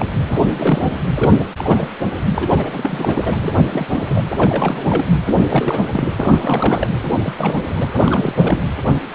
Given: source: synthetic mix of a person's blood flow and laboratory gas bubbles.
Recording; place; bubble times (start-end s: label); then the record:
Doppler ultrasound of blood flow; precordium
0.00-0.07 s: bubbles
0.27-0.93 s: bubbles
1.14-1.46 s: bubbles
1.58-1.88 s: bubbles
2.35-3.35 s: bubbles
3.43-4.24 s: bubbles
4.37-5.05 s: bubbles
5.23-5.85 s: bubbles
5.92-6.12 s: bubbles
6.20-6.88 s: bubbles
7.07-7.20 s: bubbles
7.22-7.58 s: bubbles
7.66-7.94 s: bubbles
7.96-8.62 s: bubbles
From the record:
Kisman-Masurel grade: 342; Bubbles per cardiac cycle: rolling drumbeat, 9 or more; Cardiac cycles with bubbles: 100%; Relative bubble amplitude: moderate (0.250 to 0.450); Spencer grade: 3 (all of the cardiac periods contain showers or single bubble signals, but not dominating or overriding the cardiac motion signals); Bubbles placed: anywhere in the cardiac cycle